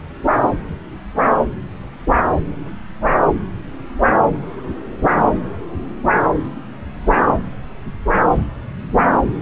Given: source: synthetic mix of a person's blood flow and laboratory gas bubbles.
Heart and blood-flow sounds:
Doppler ultrasound of blood flow; subclavian vein
no bubbles
From the record:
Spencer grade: 0 (complete lack of bubble signals)

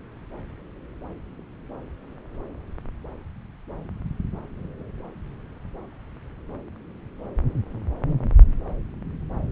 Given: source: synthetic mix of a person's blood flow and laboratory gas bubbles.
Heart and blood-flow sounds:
Doppler ultrasound of blood flow; subclavian vein
no bubbles
From the record:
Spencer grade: 0 (complete lack of bubble signals)

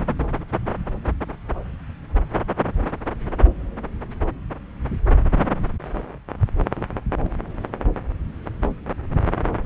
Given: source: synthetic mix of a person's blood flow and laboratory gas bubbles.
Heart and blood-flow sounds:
Doppler ultrasound of blood flow; subclavian vein
6.76-6.87 s: bubbles
7.20-7.32 s: bubbles
From the record:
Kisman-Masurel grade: 111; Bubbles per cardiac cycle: 1 to 2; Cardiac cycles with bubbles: 1 to 10%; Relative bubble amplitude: barely perceptible (0.100 to 0.250); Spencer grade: 1 (occasional bubble signal discernible with the cardiac motion signal, with majority of cardiac periods free of bubbles); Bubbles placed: anywhere in the cardiac cycle

